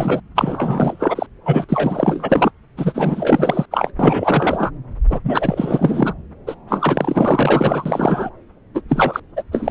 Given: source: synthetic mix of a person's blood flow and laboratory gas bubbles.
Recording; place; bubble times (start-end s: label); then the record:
Doppler ultrasound of blood flow; subclavian vein
0.00-0.21 s: bubbles
0.35-1.27 s: bubbles
1.45-2.51 s: bubbles
2.76-3.65 s: bubbles
3.71-3.92 s: bubbles
3.99-4.71 s: bubbles
5.09-5.20 s: bubbles
5.24-6.13 s: bubbles
6.46-6.55 s: bubbles
6.68-8.30 s: bubbles
8.74-8.81 s: bubbles
8.88-9.20 s: bubbles
9.36-9.43 s: bubbles
9.52-9.71 s: bubbles
From the record:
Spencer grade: 4 (maximum detectable bubble signal sounding continuously throughout systole and diastole of every cardiac period, and overriding the amplitude of the normal cardiac signals); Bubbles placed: anywhere in the cardiac cycle